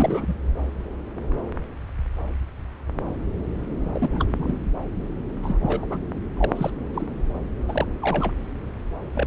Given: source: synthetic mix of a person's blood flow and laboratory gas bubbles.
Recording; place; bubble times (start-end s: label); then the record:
Doppler ultrasound of blood flow; subclavian vein
0.00-0.35 s: bubbles
3.83-4.58 s: bubbles
5.42-5.59 s: bubbles
5.62-5.87 s: bubbles
5.90-5.98 s: bubbles
6.37-6.52 s: bubbles
6.55-6.70 s: bubbles
6.94-7.07 s: bubbles
7.68-7.85 s: bubbles
8.01-8.31 s: bubbles
9.14-9.27 s: bubbles
From the record:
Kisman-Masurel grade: 233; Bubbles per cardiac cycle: several, 3 to 8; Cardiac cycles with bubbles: 50 to 99%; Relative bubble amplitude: loud (0.450 to 0.775); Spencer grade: 3 (all of the cardiac periods contain showers or single bubble signals, but not dominating or overriding the cardiac motion signals); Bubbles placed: anywhere in the cardiac cycle